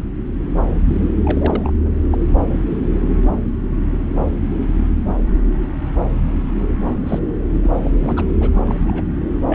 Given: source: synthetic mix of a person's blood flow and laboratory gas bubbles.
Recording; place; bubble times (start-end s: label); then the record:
Doppler ultrasound of blood flow; subclavian vein
1.25-1.73 s: bubbles
1.85-1.91 s: bubbles
2.11-2.18 s: bubbles
7.07-7.19 s: bubbles
7.52-7.57 s: bubbles
7.63-7.70 s: bubbles
7.83-7.90 s: bubbles
8.00-8.24 s: bubbles
8.40-8.50 s: bubbles
8.65-8.75 s: bubbles
8.78-9.03 s: bubbles
9.47-9.55 s: bubbles
From the record:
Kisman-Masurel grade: 222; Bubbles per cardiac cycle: several, 3 to 8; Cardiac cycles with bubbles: 10 to 50%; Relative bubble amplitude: moderate (0.250 to 0.450); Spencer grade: 2 (many but less than half of the cardiac periods contain bubble signals, singularly or in groups); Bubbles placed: anywhere in the cardiac cycle